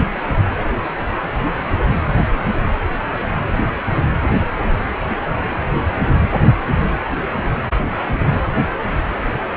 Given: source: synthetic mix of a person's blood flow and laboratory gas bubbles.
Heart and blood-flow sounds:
Doppler ultrasound of blood flow; precordium
no bubbles
From the record:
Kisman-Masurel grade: 000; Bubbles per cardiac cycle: 0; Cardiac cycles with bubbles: 0%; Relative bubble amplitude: no bubbles discernible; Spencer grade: 0 (complete lack of bubble signals)

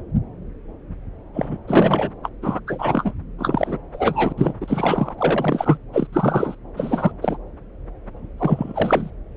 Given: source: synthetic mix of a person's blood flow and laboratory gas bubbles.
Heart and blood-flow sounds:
Doppler ultrasound of blood flow; subclavian vein
1.33-1.57 s: bubbles
1.68-2.11 s: bubbles
2.23-2.29 s: bubbles
2.42-2.60 s: bubbles
2.67-3.12 s: bubbles
3.38-3.78 s: bubbles
3.92-4.33 s: bubbles
4.37-4.53 s: bubbles
4.60-5.16 s: bubbles
5.18-5.77 s: bubbles
5.92-6.07 s: bubbles
6.12-6.55 s: bubbles
6.76-7.12 s: bubbles
7.21-7.37 s: bubbles
8.38-9.10 s: bubbles
From the record:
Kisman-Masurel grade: 333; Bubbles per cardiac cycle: rolling drumbeat, 9 or more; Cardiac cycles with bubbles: 50 to 99%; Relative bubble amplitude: loud (0.450 to 0.775); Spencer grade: 3 (all of the cardiac periods contain showers or single bubble signals, but not dominating or overriding the cardiac motion signals); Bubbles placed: anywhere in the cardiac cycle

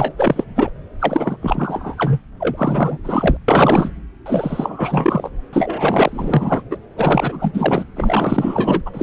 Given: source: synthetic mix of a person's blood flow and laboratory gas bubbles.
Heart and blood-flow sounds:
Doppler ultrasound of blood flow; subclavian vein
0.00-0.14 s: bubbles
0.17-0.45 s: bubbles
0.55-0.72 s: bubbles
0.99-1.36 s: bubbles
1.42-2.19 s: bubbles
2.40-2.98 s: bubbles
3.04-3.37 s: bubbles
3.48-3.90 s: bubbles
4.26-5.30 s: bubbles
5.52-6.63 s: bubbles
6.71-6.77 s: bubbles
6.96-7.85 s: bubbles
7.96-8.82 s: bubbles
8.86-8.90 s: bubbles
8.94-9.03 s: bubbles
From the record:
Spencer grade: 4 (maximum detectable bubble signal sounding continuously throughout systole and diastole of every cardiac period, and overriding the amplitude of the normal cardiac signals); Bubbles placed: anywhere in the cardiac cycle

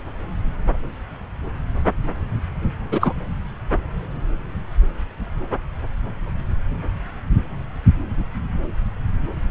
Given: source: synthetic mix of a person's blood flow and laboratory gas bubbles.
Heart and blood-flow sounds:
Doppler ultrasound of blood flow; subclavian vein
2.91-3.14 s: bubbles
From the record:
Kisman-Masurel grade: 213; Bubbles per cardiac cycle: several, 3 to 8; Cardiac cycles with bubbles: 1 to 10%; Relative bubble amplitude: loud (0.450 to 0.775); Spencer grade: 1 (occasional bubble signal discernible with the cardiac motion signal, with majority of cardiac periods free of bubbles); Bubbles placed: anywhere in the cardiac cycle

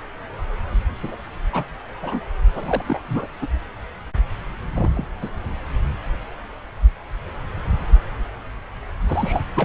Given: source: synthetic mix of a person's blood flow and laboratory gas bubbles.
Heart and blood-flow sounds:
Doppler ultrasound of blood flow; subclavian vein
1.02-1.16 s: bubbles
1.52-1.65 s: bubbles
2.02-2.19 s: bubbles
2.54-2.99 s: bubbles
3.08-3.27 s: bubbles
3.42-3.47 s: bubbles
4.75-4.91 s: bubbles
4.95-5.08 s: bubbles
5.21-5.29 s: bubbles
9.07-9.44 s: bubbles
9.54-9.65 s: bubbles
From the record:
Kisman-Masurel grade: 232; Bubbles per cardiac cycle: several, 3 to 8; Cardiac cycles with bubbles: 50 to 99%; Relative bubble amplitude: moderate (0.250 to 0.450); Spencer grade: 3 (all of the cardiac periods contain showers or single bubble signals, but not dominating or overriding the cardiac motion signals); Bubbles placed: anywhere in the cardiac cycle

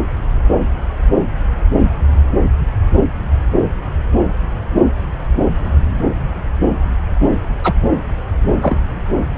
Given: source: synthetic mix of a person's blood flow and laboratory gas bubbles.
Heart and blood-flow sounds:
Doppler ultrasound of blood flow; subclavian vein
7.63-7.74 s: bubbles
8.62-8.79 s: bubbles
From the record:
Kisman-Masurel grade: 113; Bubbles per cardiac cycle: 1 to 2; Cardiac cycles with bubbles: 1 to 10%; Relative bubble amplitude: loud (0.450 to 0.775); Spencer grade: 1 (occasional bubble signal discernible with the cardiac motion signal, with majority of cardiac periods free of bubbles); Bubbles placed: anywhere in the cardiac cycle

